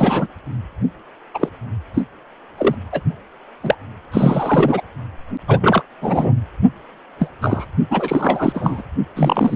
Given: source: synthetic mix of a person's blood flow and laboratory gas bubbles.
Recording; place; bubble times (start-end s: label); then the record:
Doppler ultrasound of blood flow; precordium
0.00-0.27 s: bubbles
1.34-1.49 s: bubbles
1.94-2.03 s: bubbles
2.58-2.76 s: bubbles
2.92-3.01 s: bubbles
3.62-3.75 s: bubbles
4.12-4.82 s: bubbles
5.46-5.83 s: bubbles
6.01-6.33 s: bubbles
7.19-7.28 s: bubbles
7.41-7.66 s: bubbles
7.90-8.82 s: bubbles
9.16-9.56 s: bubbles
From the record:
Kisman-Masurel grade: 243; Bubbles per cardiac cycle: several, 3 to 8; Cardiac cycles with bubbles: 100%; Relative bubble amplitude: loud (0.450 to 0.775); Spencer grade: 3 (all of the cardiac periods contain showers or single bubble signals, but not dominating or overriding the cardiac motion signals); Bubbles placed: only in the low amplitude regions of the cardiac cycle